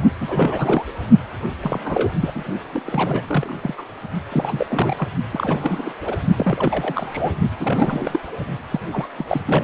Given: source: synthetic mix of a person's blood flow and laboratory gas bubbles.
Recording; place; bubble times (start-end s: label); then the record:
Doppler ultrasound of blood flow; precordium
0.20-0.84 s: bubbles
1.60-1.79 s: bubbles
1.84-2.12 s: bubbles
2.20-2.31 s: bubbles
2.35-2.45 s: bubbles
2.73-2.83 s: bubbles
2.86-3.22 s: bubbles
3.27-3.60 s: bubbles
3.62-3.75 s: bubbles
3.77-3.85 s: bubbles
4.32-4.66 s: bubbles
4.70-5.08 s: bubbles
5.32-5.92 s: bubbles
6.05-6.17 s: bubbles
6.36-7.32 s: bubbles
7.59-8.19 s: bubbles
8.71-8.80 s: bubbles
8.92-9.07 s: bubbles
9.18-9.24 s: bubbles
9.27-9.41 s: bubbles
9.46-9.63 s: bubbles
From the record:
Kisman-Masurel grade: 342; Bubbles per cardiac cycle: rolling drumbeat, 9 or more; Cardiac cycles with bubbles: 100%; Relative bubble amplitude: moderate (0.250 to 0.450); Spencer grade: 3 (all of the cardiac periods contain showers or single bubble signals, but not dominating or overriding the cardiac motion signals); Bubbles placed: only in the low amplitude regions of the cardiac cycle